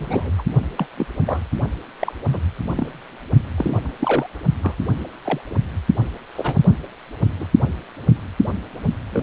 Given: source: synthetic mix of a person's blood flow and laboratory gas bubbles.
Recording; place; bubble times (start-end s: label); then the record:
Doppler ultrasound of blood flow; precordium
0.00-0.30 s: bubbles
0.38-0.43 s: bubbles
0.78-0.86 s: bubbles
0.98-1.06 s: bubbles
1.26-1.40 s: bubbles
2.00-2.12 s: bubbles
2.28-2.39 s: bubbles
2.63-3.01 s: bubbles
3.57-3.80 s: bubbles
3.84-3.92 s: bubbles
4.00-4.27 s: bubbles
4.62-4.75 s: bubbles
5.24-5.41 s: bubbles
5.50-5.54 s: bubbles
6.35-6.54 s: bubbles
7.39-7.46 s: bubbles
9.10-9.22 s: bubbles
From the record:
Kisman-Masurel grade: 232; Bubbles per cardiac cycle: several, 3 to 8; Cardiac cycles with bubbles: 50 to 99%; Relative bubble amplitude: moderate (0.250 to 0.450); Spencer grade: 3 (all of the cardiac periods contain showers or single bubble signals, but not dominating or overriding the cardiac motion signals); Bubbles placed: only in the low amplitude regions of the cardiac cycle